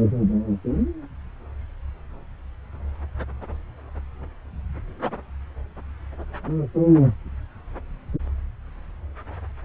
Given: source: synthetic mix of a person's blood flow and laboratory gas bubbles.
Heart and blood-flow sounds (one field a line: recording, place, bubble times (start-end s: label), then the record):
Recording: Doppler ultrasound of blood flow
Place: subclavian vein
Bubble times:
no bubbles
From the record:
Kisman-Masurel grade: 000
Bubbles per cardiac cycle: 0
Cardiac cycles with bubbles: 0%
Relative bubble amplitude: no bubbles discernible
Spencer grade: 0 (complete lack of bubble signals)